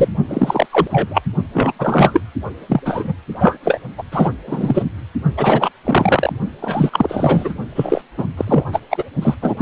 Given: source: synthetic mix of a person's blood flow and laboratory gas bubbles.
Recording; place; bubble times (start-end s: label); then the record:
Doppler ultrasound of blood flow; precordium
0.00-0.08 s: bubbles
0.28-0.66 s: bubbles
0.71-0.88 s: bubbles
0.90-1.22 s: bubbles
1.53-1.72 s: bubbles
1.79-2.21 s: bubbles
2.68-2.81 s: bubbles
2.85-3.13 s: bubbles
3.40-3.57 s: bubbles
3.63-3.80 s: bubbles
3.97-4.02 s: bubbles
4.12-4.31 s: bubbles
4.46-4.83 s: bubbles
5.37-5.70 s: bubbles
5.84-6.33 s: bubbles
6.62-6.89 s: bubbles
6.92-7.52 s: bubbles
7.75-8.01 s: bubbles
8.17-8.26 s: bubbles
8.37-8.64 s: bubbles
8.72-8.80 s: bubbles
8.91-9.04 s: bubbles
9.22-9.35 s: bubbles
9.42-9.54 s: bubbles
9.57-9.62 s: bubbles
From the record:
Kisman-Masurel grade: 343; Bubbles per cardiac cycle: rolling drumbeat, 9 or more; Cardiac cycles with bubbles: 100%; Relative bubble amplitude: loud (0.450 to 0.775); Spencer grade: 3 (all of the cardiac periods contain showers or single bubble signals, but not dominating or overriding the cardiac motion signals); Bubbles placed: only in the low amplitude regions of the cardiac cycle